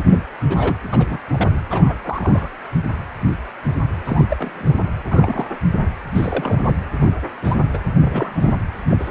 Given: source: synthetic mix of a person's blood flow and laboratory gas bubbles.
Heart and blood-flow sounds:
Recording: Doppler ultrasound of blood flow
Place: precordium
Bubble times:
0.07-0.23 s: bubbles
0.40-0.78 s: bubbles
0.92-1.18 s: bubbles
1.31-1.51 s: bubbles
1.70-1.94 s: bubbles
2.04-2.51 s: bubbles
4.04-4.24 s: bubbles
4.30-4.75 s: bubbles
5.08-5.47 s: bubbles
6.15-6.76 s: bubbles
6.97-7.13 s: bubbles
7.42-7.56 s: bubbles
7.73-7.78 s: bubbles
8.00-8.53 s: bubbles
8.90-9.11 s: bubbles
From the record:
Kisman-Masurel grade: 232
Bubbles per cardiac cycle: several, 3 to 8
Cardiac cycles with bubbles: 50 to 99%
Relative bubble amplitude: moderate (0.250 to 0.450)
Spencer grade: 3 (all of the cardiac periods contain showers or single bubble signals, but not dominating or overriding the cardiac motion signals)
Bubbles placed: anywhere in the cardiac cycle

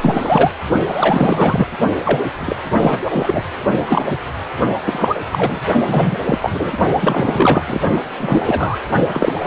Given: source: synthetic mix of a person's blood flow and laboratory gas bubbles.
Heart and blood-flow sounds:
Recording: Doppler ultrasound of blood flow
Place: precordium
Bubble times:
0.01-0.51 s: bubbles
0.86-1.67 s: bubbles
2.02-2.29 s: bubbles
2.40-2.56 s: bubbles
2.79-2.98 s: bubbles
3.04-3.43 s: bubbles
3.88-4.05 s: bubbles
4.09-4.17 s: bubbles
4.84-5.15 s: bubbles
5.31-5.60 s: bubbles
5.87-6.18 s: bubbles
6.25-6.51 s: bubbles
6.54-6.72 s: bubbles
7.01-7.80 s: bubbles
8.17-8.77 s: bubbles
9.13-9.47 s: bubbles
From the record:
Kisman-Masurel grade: 343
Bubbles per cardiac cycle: rolling drumbeat, 9 or more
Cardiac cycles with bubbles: 100%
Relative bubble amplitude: loud (0.450 to 0.775)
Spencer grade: 3 (all of the cardiac periods contain showers or single bubble signals, but not dominating or overriding the cardiac motion signals)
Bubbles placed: only in the low amplitude regions of the cardiac cycle

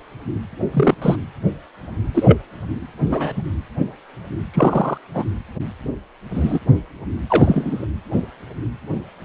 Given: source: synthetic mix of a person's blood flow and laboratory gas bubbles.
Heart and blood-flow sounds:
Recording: Doppler ultrasound of blood flow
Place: precordium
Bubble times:
0.73-0.94 s: bubbles
1.02-1.16 s: bubbles
2.14-2.38 s: bubbles
3.09-3.32 s: bubbles
3.36-3.42 s: bubbles
4.54-4.98 s: bubbles
5.14-5.24 s: bubbles
6.33-6.59 s: bubbles
7.29-7.85 s: bubbles
From the record:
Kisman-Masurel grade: 123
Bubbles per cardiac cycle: 1 to 2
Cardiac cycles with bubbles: 10 to 50%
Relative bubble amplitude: loud (0.450 to 0.775)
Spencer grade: 2 (many but less than half of the cardiac periods contain bubble signals, singularly or in groups)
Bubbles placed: anywhere in the cardiac cycle

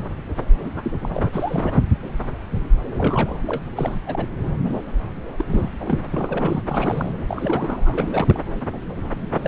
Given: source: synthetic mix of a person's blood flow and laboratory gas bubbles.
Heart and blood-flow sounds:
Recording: Doppler ultrasound of blood flow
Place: subclavian vein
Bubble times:
0.74-1.29 s: bubbles
1.32-1.79 s: bubbles
2.98-3.37 s: bubbles
3.46-3.61 s: bubbles
3.76-4.01 s: bubbles
4.06-4.28 s: bubbles
5.37-5.70 s: bubbles
5.80-6.05 s: bubbles
6.10-6.62 s: bubbles
6.68-7.10 s: bubbles
7.27-8.39 s: bubbles
9.35-9.48 s: bubbles
From the record:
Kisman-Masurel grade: 332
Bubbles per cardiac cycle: rolling drumbeat, 9 or more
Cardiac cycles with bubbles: 50 to 99%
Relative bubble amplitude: moderate (0.250 to 0.450)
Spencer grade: 3 (all of the cardiac periods contain showers or single bubble signals, but not dominating or overriding the cardiac motion signals)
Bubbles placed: anywhere in the cardiac cycle

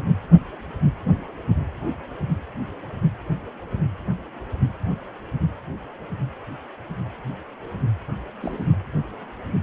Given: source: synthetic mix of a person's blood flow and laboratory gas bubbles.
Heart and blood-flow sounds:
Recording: Doppler ultrasound of blood flow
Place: precordium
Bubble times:
8.40-8.66 s: bubbles
From the record:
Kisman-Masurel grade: 111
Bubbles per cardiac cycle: 1 to 2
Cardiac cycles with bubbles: 1 to 10%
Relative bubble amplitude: barely perceptible (0.100 to 0.250)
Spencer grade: 1 (occasional bubble signal discernible with the cardiac motion signal, with majority of cardiac periods free of bubbles)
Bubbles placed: only in the low amplitude regions of the cardiac cycle

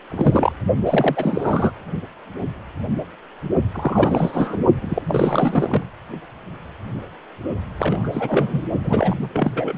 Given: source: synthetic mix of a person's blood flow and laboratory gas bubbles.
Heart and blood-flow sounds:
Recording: Doppler ultrasound of blood flow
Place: precordium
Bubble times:
0.10-0.52 s: bubbles
0.85-1.71 s: bubbles
3.73-4.58 s: bubbles
4.81-5.02 s: bubbles
5.07-5.86 s: bubbles
7.78-8.62 s: bubbles
8.82-9.17 s: bubbles
9.21-9.27 s: bubbles
9.33-9.77 s: bubbles
From the record:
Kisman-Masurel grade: 332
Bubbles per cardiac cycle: rolling drumbeat, 9 or more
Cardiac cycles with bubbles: 50 to 99%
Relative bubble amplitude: moderate (0.250 to 0.450)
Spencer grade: 3 (all of the cardiac periods contain showers or single bubble signals, but not dominating or overriding the cardiac motion signals)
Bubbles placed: only in the low amplitude regions of the cardiac cycle

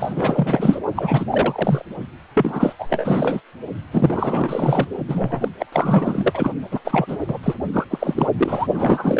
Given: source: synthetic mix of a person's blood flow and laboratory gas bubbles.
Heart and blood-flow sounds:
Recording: Doppler ultrasound of blood flow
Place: precordium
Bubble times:
0.00-0.80 s: bubbles
0.95-1.25 s: bubbles
1.31-1.83 s: bubbles
2.34-2.73 s: bubbles
2.79-3.41 s: bubbles
3.92-4.87 s: bubbles
5.07-5.49 s: bubbles
5.58-5.66 s: bubbles
5.72-6.52 s: bubbles
6.71-6.79 s: bubbles
6.84-7.17 s: bubbles
7.27-7.38 s: bubbles
7.43-7.54 s: bubbles
7.72-7.85 s: bubbles
7.90-8.27 s: bubbles
8.38-8.67 s: bubbles
8.74-9.19 s: bubbles
From the record:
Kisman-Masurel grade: 444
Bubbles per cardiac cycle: continuous sound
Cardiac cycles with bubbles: 100%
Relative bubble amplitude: maximal (0.775 to 0.999)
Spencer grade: 4 (maximum detectable bubble signal sounding continuously throughout systole and diastole of every cardiac period, and overriding the amplitude of the normal cardiac signals)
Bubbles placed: only in the low amplitude regions of the cardiac cycle

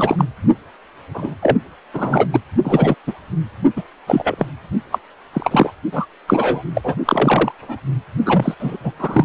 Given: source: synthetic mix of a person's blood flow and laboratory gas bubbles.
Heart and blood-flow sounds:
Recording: Doppler ultrasound of blood flow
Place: precordium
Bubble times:
0.00-0.25 s: bubbles
1.14-1.34 s: bubbles
1.42-1.58 s: bubbles
1.93-2.27 s: bubbles
2.33-2.40 s: bubbles
2.64-2.95 s: bubbles
3.06-3.14 s: bubbles
3.76-3.83 s: bubbles
4.07-4.46 s: bubbles
4.92-4.99 s: bubbles
5.33-5.72 s: bubbles
5.92-6.06 s: bubbles
6.28-6.63 s: bubbles
6.75-6.81 s: bubbles
6.83-6.96 s: bubbles
7.05-7.52 s: bubbles
7.58-7.80 s: bubbles
8.25-8.54 s: bubbles
8.59-8.77 s: bubbles
8.83-8.92 s: bubbles
8.98-9.25 s: bubbles
From the record:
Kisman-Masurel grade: 243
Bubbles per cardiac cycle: several, 3 to 8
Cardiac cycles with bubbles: 100%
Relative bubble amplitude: loud (0.450 to 0.775)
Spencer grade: 3 (all of the cardiac periods contain showers or single bubble signals, but not dominating or overriding the cardiac motion signals)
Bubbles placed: only in the low amplitude regions of the cardiac cycle

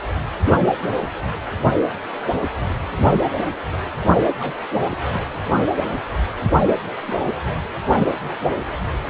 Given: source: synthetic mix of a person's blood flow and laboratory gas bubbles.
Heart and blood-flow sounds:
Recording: Doppler ultrasound of blood flow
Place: precordium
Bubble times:
4.39-4.55 s: bubbles
4.72-4.97 s: bubbles
7.06-7.28 s: bubbles
7.30-7.37 s: bubbles
From the record:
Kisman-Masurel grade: 121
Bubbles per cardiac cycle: 1 to 2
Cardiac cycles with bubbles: 10 to 50%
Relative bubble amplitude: barely perceptible (0.100 to 0.250)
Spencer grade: 2 (many but less than half of the cardiac periods contain bubble signals, singularly or in groups)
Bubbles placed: anywhere in the cardiac cycle

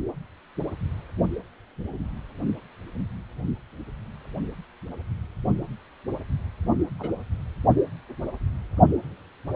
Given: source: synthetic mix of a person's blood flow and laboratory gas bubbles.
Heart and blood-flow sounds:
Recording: Doppler ultrasound of blood flow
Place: precordium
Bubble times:
6.99-7.10 s: bubbles
From the record:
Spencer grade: 1 (occasional bubble signal discernible with the cardiac motion signal, with majority of cardiac periods free of bubbles)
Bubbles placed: only in the low amplitude regions of the cardiac cycle

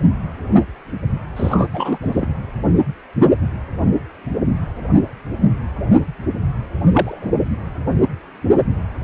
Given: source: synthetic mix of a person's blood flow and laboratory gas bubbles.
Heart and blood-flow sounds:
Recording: Doppler ultrasound of blood flow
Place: precordium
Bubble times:
1.36-1.67 s: bubbles
1.72-1.98 s: bubbles
2.01-2.27 s: bubbles
6.92-7.31 s: bubbles
From the record:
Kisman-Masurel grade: 222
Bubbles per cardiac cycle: several, 3 to 8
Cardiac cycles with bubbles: 10 to 50%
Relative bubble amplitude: moderate (0.250 to 0.450)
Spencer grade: 2 (many but less than half of the cardiac periods contain bubble signals, singularly or in groups)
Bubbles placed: anywhere in the cardiac cycle

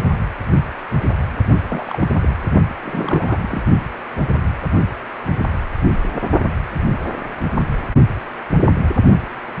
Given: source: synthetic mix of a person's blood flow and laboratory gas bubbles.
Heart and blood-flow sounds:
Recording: Doppler ultrasound of blood flow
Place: precordium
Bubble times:
1.68-2.08 s: bubbles
2.21-2.35 s: bubbles
2.83-3.62 s: bubbles
From the record:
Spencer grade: 2 (many but less than half of the cardiac periods contain bubble signals, singularly or in groups)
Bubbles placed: only in the low amplitude regions of the cardiac cycle

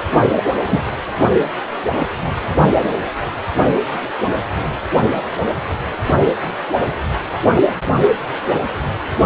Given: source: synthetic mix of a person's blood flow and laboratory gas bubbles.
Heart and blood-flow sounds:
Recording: Doppler ultrasound of blood flow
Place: precordium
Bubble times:
0.36-0.43 s: bubbles
0.66-0.82 s: bubbles
From the record:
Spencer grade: 1 (occasional bubble signal discernible with the cardiac motion signal, with majority of cardiac periods free of bubbles)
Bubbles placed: anywhere in the cardiac cycle

